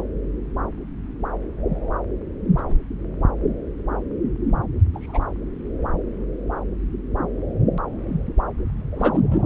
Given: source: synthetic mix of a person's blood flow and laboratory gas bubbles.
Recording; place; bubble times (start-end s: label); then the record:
Doppler ultrasound of blood flow; subclavian vein
2.57-2.62 s: bubbles
2.69-2.75 s: bubbles
4.94-5.19 s: bubbles
8.91-9.45 s: bubbles
From the record:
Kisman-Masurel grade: 121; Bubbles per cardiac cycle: 1 to 2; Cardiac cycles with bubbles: 10 to 50%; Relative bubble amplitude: barely perceptible (0.100 to 0.250); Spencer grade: 2 (many but less than half of the cardiac periods contain bubble signals, singularly or in groups); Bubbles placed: anywhere in the cardiac cycle